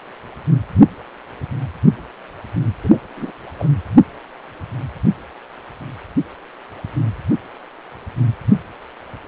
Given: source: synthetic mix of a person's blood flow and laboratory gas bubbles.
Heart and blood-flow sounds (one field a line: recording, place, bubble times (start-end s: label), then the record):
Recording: Doppler ultrasound of blood flow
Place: precordium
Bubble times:
2.83-2.99 s: bubbles
3.17-3.32 s: bubbles
3.58-3.69 s: bubbles
From the record:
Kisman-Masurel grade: 211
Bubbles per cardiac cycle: several, 3 to 8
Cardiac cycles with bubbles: 1 to 10%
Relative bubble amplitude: barely perceptible (0.100 to 0.250)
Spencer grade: 1 (occasional bubble signal discernible with the cardiac motion signal, with majority of cardiac periods free of bubbles)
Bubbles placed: anywhere in the cardiac cycle